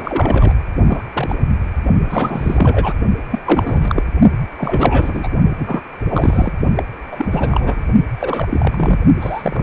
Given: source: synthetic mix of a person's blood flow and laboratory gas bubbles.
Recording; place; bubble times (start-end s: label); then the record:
Doppler ultrasound of blood flow; precordium
0.00-0.53 s: bubbles
0.85-1.02 s: bubbles
1.14-1.36 s: bubbles
2.05-2.93 s: bubbles
3.30-3.39 s: bubbles
3.44-4.04 s: bubbles
4.57-5.30 s: bubbles
5.58-5.80 s: bubbles
6.09-6.52 s: bubbles
6.76-6.83 s: bubbles
7.11-7.82 s: bubbles
8.21-8.98 s: bubbles
9.20-9.63 s: bubbles
From the record:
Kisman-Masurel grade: 343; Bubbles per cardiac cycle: rolling drumbeat, 9 or more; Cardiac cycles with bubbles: 100%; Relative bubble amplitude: loud (0.450 to 0.775); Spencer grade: 3 (all of the cardiac periods contain showers or single bubble signals, but not dominating or overriding the cardiac motion signals); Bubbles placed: only in the low amplitude regions of the cardiac cycle